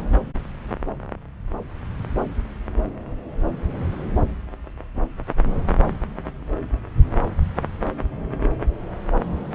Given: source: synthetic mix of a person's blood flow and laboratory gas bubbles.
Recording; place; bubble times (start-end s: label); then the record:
Doppler ultrasound of blood flow; subclavian vein
no bubbles
From the record:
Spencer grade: 0 (complete lack of bubble signals)